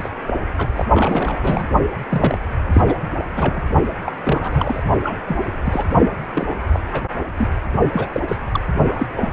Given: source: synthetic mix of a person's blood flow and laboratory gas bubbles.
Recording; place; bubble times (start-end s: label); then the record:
Doppler ultrasound of blood flow; precordium
0.00-0.10 s: bubbles
0.27-0.33 s: bubbles
0.57-0.69 s: bubbles
0.76-0.85 s: bubbles
0.94-1.67 s: bubbles
2.09-2.38 s: bubbles
2.73-2.82 s: bubbles
2.86-2.95 s: bubbles
3.29-3.62 s: bubbles
4.05-4.12 s: bubbles
4.23-4.83 s: bubbles
5.04-5.18 s: bubbles
5.25-5.37 s: bubbles
5.64-5.84 s: bubbles
6.33-6.56 s: bubbles
6.73-6.80 s: bubbles
6.92-7.04 s: bubbles
7.38-7.50 s: bubbles
7.92-8.08 s: bubbles
8.12-8.21 s: bubbles
8.28-8.36 s: bubbles
8.52-8.61 s: bubbles
8.89-9.06 s: bubbles
9.16-9.29 s: bubbles
9.31-9.33 s: bubbles
From the record:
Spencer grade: 3 (all of the cardiac periods contain showers or single bubble signals, but not dominating or overriding the cardiac motion signals); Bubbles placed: only in the low amplitude regions of the cardiac cycle